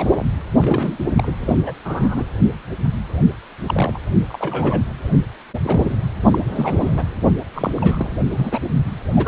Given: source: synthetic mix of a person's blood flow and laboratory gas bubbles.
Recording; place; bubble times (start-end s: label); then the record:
Doppler ultrasound of blood flow; precordium
0.00-0.27 s: bubbles
0.57-0.97 s: bubbles
1.17-1.32 s: bubbles
1.41-1.72 s: bubbles
1.84-2.24 s: bubbles
3.67-3.99 s: bubbles
4.29-4.81 s: bubbles
5.12-5.20 s: bubbles
5.62-5.96 s: bubbles
6.23-6.39 s: bubbles
6.55-7.04 s: bubbles
7.54-7.72 s: bubbles
7.76-8.09 s: bubbles
8.29-8.58 s: bubbles
9.13-9.28 s: bubbles
From the record:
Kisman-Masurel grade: 242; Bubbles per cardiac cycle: several, 3 to 8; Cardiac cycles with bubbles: 100%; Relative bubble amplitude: moderate (0.250 to 0.450); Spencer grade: 3 (all of the cardiac periods contain showers or single bubble signals, but not dominating or overriding the cardiac motion signals); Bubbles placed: anywhere in the cardiac cycle